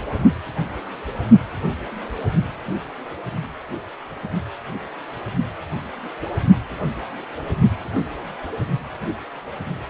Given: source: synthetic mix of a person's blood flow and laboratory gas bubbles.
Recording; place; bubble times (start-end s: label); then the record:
Doppler ultrasound of blood flow; precordium
no bubbles
From the record:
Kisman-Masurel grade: 000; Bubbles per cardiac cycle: 0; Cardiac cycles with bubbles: 0%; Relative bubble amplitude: no bubbles discernible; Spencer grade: 0 (complete lack of bubble signals)